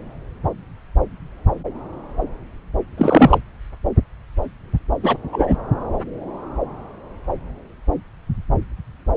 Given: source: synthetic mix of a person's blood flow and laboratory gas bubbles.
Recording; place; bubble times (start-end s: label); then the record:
Doppler ultrasound of blood flow; subclavian vein
2.98-3.38 s: bubbles
5.03-5.18 s: bubbles
5.32-5.56 s: bubbles
From the record:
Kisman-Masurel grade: 213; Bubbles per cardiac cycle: several, 3 to 8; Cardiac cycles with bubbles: 1 to 10%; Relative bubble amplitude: loud (0.450 to 0.775); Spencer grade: 1 (occasional bubble signal discernible with the cardiac motion signal, with majority of cardiac periods free of bubbles); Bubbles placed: anywhere in the cardiac cycle